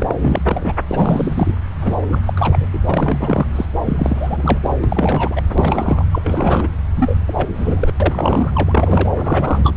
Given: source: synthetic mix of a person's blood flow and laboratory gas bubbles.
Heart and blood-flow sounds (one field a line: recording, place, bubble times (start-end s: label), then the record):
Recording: Doppler ultrasound of blood flow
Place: subclavian vein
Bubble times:
0.00-0.14 s: bubbles
0.20-0.42 s: bubbles
0.46-0.72 s: bubbles
0.89-1.58 s: bubbles
1.80-2.20 s: bubbles
2.27-2.34 s: bubbles
2.37-2.66 s: bubbles
2.73-2.79 s: bubbles
2.88-3.47 s: bubbles
3.55-3.66 s: bubbles
3.85-4.59 s: bubbles
4.63-4.69 s: bubbles
4.83-5.42 s: bubbles
5.58-6.05 s: bubbles
6.11-6.68 s: bubbles
6.96-7.14 s: bubbles
7.27-7.48 s: bubbles
7.54-7.92 s: bubbles
8.00-9.09 s: bubbles
9.17-9.74 s: bubbles
From the record:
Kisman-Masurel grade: 342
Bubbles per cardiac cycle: rolling drumbeat, 9 or more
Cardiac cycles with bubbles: 100%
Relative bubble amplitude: moderate (0.250 to 0.450)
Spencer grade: 3 (all of the cardiac periods contain showers or single bubble signals, but not dominating or overriding the cardiac motion signals)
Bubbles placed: anywhere in the cardiac cycle